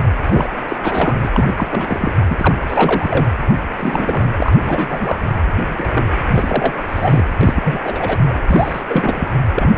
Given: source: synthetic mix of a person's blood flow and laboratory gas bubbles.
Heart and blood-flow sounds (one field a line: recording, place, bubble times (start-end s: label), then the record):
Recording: Doppler ultrasound of blood flow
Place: precordium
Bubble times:
0.00-0.04 s: bubbles
0.26-0.53 s: bubbles
0.68-0.77 s: bubbles
0.82-1.16 s: bubbles
1.24-1.30 s: bubbles
1.33-1.54 s: bubbles
1.58-1.67 s: bubbles
1.70-2.13 s: bubbles
2.29-2.54 s: bubbles
2.67-3.29 s: bubbles
3.47-3.54 s: bubbles
3.78-4.29 s: bubbles
4.37-4.53 s: bubbles
4.63-5.20 s: bubbles
5.75-6.14 s: bubbles
6.33-6.73 s: bubbles
6.87-7.24 s: bubbles
7.41-8.40 s: bubbles
8.49-8.83 s: bubbles
8.87-9.28 s: bubbles
9.55-9.72 s: bubbles
From the record:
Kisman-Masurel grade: 342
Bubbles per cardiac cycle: rolling drumbeat, 9 or more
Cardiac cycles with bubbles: 100%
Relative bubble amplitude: moderate (0.250 to 0.450)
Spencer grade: 3 (all of the cardiac periods contain showers or single bubble signals, but not dominating or overriding the cardiac motion signals)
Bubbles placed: anywhere in the cardiac cycle